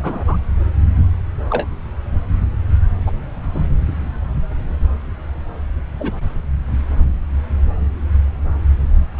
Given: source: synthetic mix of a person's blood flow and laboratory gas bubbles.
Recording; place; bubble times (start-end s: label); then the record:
Doppler ultrasound of blood flow; subclavian vein
0.00-0.24 s: bubbles
0.27-0.36 s: bubbles
1.49-1.67 s: bubbles
3.05-3.11 s: bubbles
3.54-3.61 s: bubbles
5.99-6.21 s: bubbles
9.14-9.20 s: bubbles
From the record:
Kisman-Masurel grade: 122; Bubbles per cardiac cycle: 1 to 2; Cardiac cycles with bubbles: 10 to 50%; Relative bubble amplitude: moderate (0.250 to 0.450); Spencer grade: 2 (many but less than half of the cardiac periods contain bubble signals, singularly or in groups); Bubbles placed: anywhere in the cardiac cycle